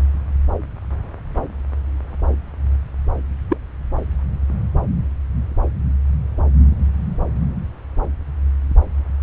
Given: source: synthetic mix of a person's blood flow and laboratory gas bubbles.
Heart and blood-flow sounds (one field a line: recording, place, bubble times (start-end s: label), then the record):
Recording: Doppler ultrasound of blood flow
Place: subclavian vein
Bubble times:
3.48-3.57 s: bubbles
From the record:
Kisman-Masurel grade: 113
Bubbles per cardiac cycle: 1 to 2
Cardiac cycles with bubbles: 1 to 10%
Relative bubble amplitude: loud (0.450 to 0.775)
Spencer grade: 1 (occasional bubble signal discernible with the cardiac motion signal, with majority of cardiac periods free of bubbles)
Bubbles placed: anywhere in the cardiac cycle